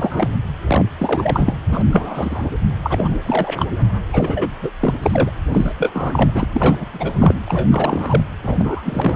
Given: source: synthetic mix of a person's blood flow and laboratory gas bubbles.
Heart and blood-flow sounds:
Doppler ultrasound of blood flow; precordium
0.00-0.31 s: bubbles
0.67-0.85 s: bubbles
0.98-1.54 s: bubbles
1.72-1.84 s: bubbles
1.91-2.46 s: bubbles
2.83-3.54 s: bubbles
3.56-3.65 s: bubbles
4.12-4.50 s: bubbles
4.62-4.71 s: bubbles
4.79-4.94 s: bubbles
5.02-5.30 s: bubbles
5.51-5.75 s: bubbles
5.79-6.30 s: bubbles
6.34-6.46 s: bubbles
6.53-6.75 s: bubbles
6.79-6.85 s: bubbles
6.92-7.34 s: bubbles
7.46-8.23 s: bubbles
8.43-9.16 s: bubbles
From the record:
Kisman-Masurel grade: 332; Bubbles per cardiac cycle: rolling drumbeat, 9 or more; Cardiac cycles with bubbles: 50 to 99%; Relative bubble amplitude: moderate (0.250 to 0.450); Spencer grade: 3 (all of the cardiac periods contain showers or single bubble signals, but not dominating or overriding the cardiac motion signals); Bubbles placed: anywhere in the cardiac cycle

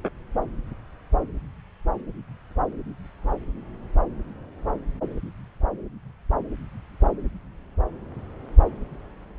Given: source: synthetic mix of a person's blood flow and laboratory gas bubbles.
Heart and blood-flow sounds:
Doppler ultrasound of blood flow; subclavian vein
no bubbles
From the record:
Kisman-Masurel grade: 000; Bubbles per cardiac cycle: 0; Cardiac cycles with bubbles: 0%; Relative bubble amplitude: no bubbles discernible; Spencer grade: 0 (complete lack of bubble signals)

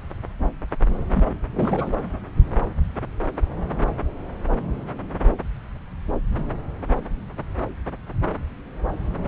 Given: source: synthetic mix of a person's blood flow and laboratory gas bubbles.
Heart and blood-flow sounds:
Doppler ultrasound of blood flow; subclavian vein
1.12-1.30 s: bubbles
1.52-1.93 s: bubbles
From the record:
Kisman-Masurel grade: 212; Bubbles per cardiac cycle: several, 3 to 8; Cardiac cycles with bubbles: 1 to 10%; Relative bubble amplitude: moderate (0.250 to 0.450); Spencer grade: 1 (occasional bubble signal discernible with the cardiac motion signal, with majority of cardiac periods free of bubbles); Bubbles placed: anywhere in the cardiac cycle

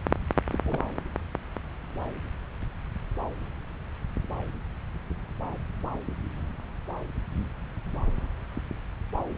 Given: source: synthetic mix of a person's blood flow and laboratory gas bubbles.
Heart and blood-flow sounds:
Doppler ultrasound of blood flow; subclavian vein
0.51-0.61 s: bubbles
0.65-0.80 s: bubbles
From the record:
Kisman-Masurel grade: 111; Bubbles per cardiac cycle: 1 to 2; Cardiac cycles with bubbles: 1 to 10%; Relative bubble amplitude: barely perceptible (0.100 to 0.250); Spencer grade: 1 (occasional bubble signal discernible with the cardiac motion signal, with majority of cardiac periods free of bubbles); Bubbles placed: anywhere in the cardiac cycle

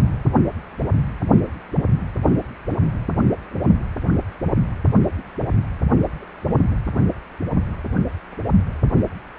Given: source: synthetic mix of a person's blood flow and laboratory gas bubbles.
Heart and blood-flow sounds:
Doppler ultrasound of blood flow; precordium
no bubbles
From the record:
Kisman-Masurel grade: 000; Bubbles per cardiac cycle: 0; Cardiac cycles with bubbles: 0%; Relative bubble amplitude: no bubbles discernible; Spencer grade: 0 (complete lack of bubble signals)

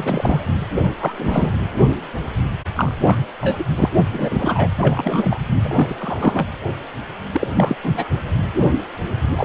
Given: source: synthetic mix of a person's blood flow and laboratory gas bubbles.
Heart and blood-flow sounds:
Doppler ultrasound of blood flow; precordium
0.00-0.52 s: bubbles
0.75-0.91 s: bubbles
1.00-1.14 s: bubbles
1.17-1.54 s: bubbles
2.76-2.95 s: bubbles
3.03-3.16 s: bubbles
3.41-3.64 s: bubbles
3.75-3.90 s: bubbles
4.11-4.69 s: bubbles
4.76-5.38 s: bubbles
5.62-5.96 s: bubbles
5.98-6.47 s: bubbles
7.32-7.47 s: bubbles
7.50-7.75 s: bubbles
7.83-8.04 s: bubbles
9.36-9.45 s: bubbles
From the record:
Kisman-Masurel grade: 332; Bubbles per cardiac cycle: rolling drumbeat, 9 or more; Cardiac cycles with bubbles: 50 to 99%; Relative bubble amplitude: moderate (0.250 to 0.450); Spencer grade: 3 (all of the cardiac periods contain showers or single bubble signals, but not dominating or overriding the cardiac motion signals); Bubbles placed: anywhere in the cardiac cycle

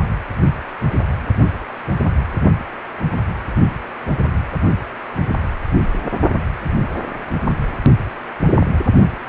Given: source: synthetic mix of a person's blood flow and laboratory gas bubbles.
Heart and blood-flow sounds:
Doppler ultrasound of blood flow; precordium
8.47-8.54 s: bubbles
8.59-8.67 s: bubbles
From the record:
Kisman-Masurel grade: 111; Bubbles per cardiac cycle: 1 to 2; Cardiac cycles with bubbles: 1 to 10%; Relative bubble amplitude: barely perceptible (0.100 to 0.250); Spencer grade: 1 (occasional bubble signal discernible with the cardiac motion signal, with majority of cardiac periods free of bubbles); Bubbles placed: only in the low amplitude regions of the cardiac cycle

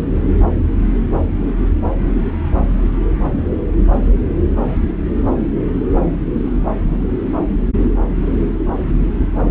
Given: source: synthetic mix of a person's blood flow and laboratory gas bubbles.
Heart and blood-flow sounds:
Doppler ultrasound of blood flow; subclavian vein
no bubbles
From the record:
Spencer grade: 0 (complete lack of bubble signals)

